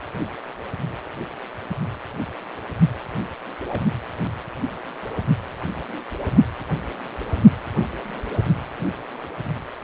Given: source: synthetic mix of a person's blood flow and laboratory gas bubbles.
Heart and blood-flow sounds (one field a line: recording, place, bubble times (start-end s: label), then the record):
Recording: Doppler ultrasound of blood flow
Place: precordium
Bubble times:
3.69-3.81 s: bubbles
From the record:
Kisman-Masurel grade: 111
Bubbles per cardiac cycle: 1 to 2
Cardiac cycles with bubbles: 1 to 10%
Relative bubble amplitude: barely perceptible (0.100 to 0.250)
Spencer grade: 1 (occasional bubble signal discernible with the cardiac motion signal, with majority of cardiac periods free of bubbles)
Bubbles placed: only in the low amplitude regions of the cardiac cycle